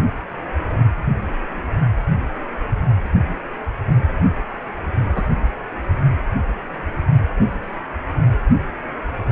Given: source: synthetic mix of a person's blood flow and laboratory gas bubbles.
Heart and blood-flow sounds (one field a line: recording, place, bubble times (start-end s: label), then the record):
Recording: Doppler ultrasound of blood flow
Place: precordium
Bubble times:
5.03-5.22 s: bubbles
From the record:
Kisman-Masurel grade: 112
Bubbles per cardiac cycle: 1 to 2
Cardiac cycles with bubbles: 1 to 10%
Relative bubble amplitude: moderate (0.250 to 0.450)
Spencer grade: 1 (occasional bubble signal discernible with the cardiac motion signal, with majority of cardiac periods free of bubbles)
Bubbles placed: only in the low amplitude regions of the cardiac cycle